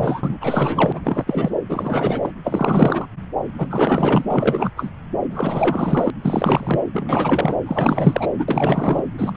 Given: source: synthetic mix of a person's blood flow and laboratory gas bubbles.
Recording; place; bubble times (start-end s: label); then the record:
Doppler ultrasound of blood flow; subclavian vein
0.00-0.38 s: bubbles
0.41-1.01 s: bubbles
1.03-1.24 s: bubbles
1.26-1.51 s: bubbles
1.69-2.32 s: bubbles
2.43-3.05 s: bubbles
3.58-4.25 s: bubbles
4.28-4.71 s: bubbles
4.76-4.90 s: bubbles
5.30-6.10 s: bubbles
6.21-6.79 s: bubbles
6.93-7.56 s: bubbles
7.65-8.45 s: bubbles
8.48-9.05 s: bubbles
9.17-9.37 s: bubbles
From the record:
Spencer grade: 4 (maximum detectable bubble signal sounding continuously throughout systole and diastole of every cardiac period, and overriding the amplitude of the normal cardiac signals); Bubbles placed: anywhere in the cardiac cycle